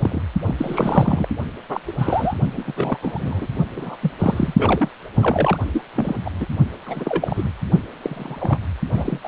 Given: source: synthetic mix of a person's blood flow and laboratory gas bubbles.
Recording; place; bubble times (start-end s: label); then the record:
Doppler ultrasound of blood flow; precordium
0.02-0.21 s: bubbles
0.46-1.28 s: bubbles
1.69-1.80 s: bubbles
1.87-1.92 s: bubbles
1.98-2.35 s: bubbles
2.53-2.64 s: bubbles
2.67-2.73 s: bubbles
2.76-2.98 s: bubbles
3.02-3.48 s: bubbles
3.76-3.97 s: bubbles
4.02-4.11 s: bubbles
4.19-4.54 s: bubbles
4.58-4.91 s: bubbles
5.17-5.58 s: bubbles
5.72-5.83 s: bubbles
5.95-6.21 s: bubbles
6.25-6.31 s: bubbles
6.40-6.46 s: bubbles
6.85-7.50 s: bubbles
8.01-8.59 s: bubbles
8.92-9.19 s: bubbles
9.23-9.27 s: bubbles
From the record:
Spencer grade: 3 (all of the cardiac periods contain showers or single bubble signals, but not dominating or overriding the cardiac motion signals); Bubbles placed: only in the low amplitude regions of the cardiac cycle